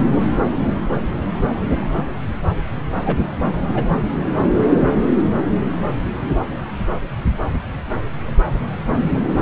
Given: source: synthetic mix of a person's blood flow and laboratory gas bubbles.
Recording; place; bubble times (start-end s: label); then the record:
Doppler ultrasound of blood flow; subclavian vein
3.05-3.24 s: bubbles
3.75-3.83 s: bubbles
From the record:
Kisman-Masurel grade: 212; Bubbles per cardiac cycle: several, 3 to 8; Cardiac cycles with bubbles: 1 to 10%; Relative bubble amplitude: moderate (0.250 to 0.450); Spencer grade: 1 (occasional bubble signal discernible with the cardiac motion signal, with majority of cardiac periods free of bubbles); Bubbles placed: anywhere in the cardiac cycle